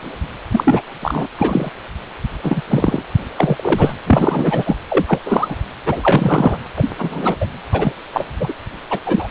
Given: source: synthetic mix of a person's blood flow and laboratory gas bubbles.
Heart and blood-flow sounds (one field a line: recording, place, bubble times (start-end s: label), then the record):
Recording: Doppler ultrasound of blood flow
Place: precordium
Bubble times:
0.51-0.82 s: bubbles
1.02-1.27 s: bubbles
1.38-1.71 s: bubbles
2.43-2.62 s: bubbles
2.70-3.02 s: bubbles
3.37-3.93 s: bubbles
4.06-4.77 s: bubbles
4.88-5.04 s: bubbles
5.07-5.19 s: bubbles
5.25-5.56 s: bubbles
5.85-6.61 s: bubbles
6.76-6.91 s: bubbles
6.98-7.36 s: bubbles
7.40-7.46 s: bubbles
7.72-7.92 s: bubbles
8.13-8.26 s: bubbles
8.40-8.54 s: bubbles
8.90-8.99 s: bubbles
9.05-9.28 s: bubbles
From the record:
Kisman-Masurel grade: 233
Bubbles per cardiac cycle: several, 3 to 8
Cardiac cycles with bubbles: 50 to 99%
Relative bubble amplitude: loud (0.450 to 0.775)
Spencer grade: 3 (all of the cardiac periods contain showers or single bubble signals, but not dominating or overriding the cardiac motion signals)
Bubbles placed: anywhere in the cardiac cycle